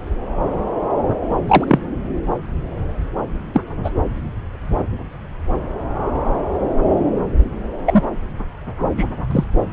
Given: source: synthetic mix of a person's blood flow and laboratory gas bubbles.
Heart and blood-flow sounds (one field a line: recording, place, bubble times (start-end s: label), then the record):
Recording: Doppler ultrasound of blood flow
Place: subclavian vein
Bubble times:
1.47-1.79 s: bubbles
3.54-3.62 s: bubbles
3.83-3.90 s: bubbles
7.85-8.02 s: bubbles
8.97-9.05 s: bubbles
9.30-9.44 s: bubbles
From the record:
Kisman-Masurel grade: 123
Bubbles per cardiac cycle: 1 to 2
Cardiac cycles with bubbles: 10 to 50%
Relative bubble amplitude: loud (0.450 to 0.775)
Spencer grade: 2 (many but less than half of the cardiac periods contain bubble signals, singularly or in groups)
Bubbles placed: anywhere in the cardiac cycle